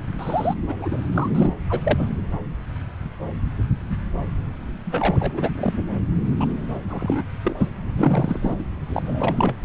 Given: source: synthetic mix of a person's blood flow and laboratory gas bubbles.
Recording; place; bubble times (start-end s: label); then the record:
Doppler ultrasound of blood flow; subclavian vein
0.18-0.54 s: bubbles
0.62-1.01 s: bubbles
1.14-1.29 s: bubbles
1.34-1.53 s: bubbles
1.69-1.81 s: bubbles
1.83-2.07 s: bubbles
4.85-5.50 s: bubbles
5.55-5.73 s: bubbles
6.26-6.34 s: bubbles
6.40-6.46 s: bubbles
6.89-7.23 s: bubbles
7.44-7.56 s: bubbles
7.59-7.67 s: bubbles
7.95-8.70 s: bubbles
8.89-9.02 s: bubbles
9.06-9.55 s: bubbles
From the record:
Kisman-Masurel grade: 232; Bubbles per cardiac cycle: several, 3 to 8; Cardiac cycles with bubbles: 50 to 99%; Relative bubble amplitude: moderate (0.250 to 0.450); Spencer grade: 3 (all of the cardiac periods contain showers or single bubble signals, but not dominating or overriding the cardiac motion signals); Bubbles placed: anywhere in the cardiac cycle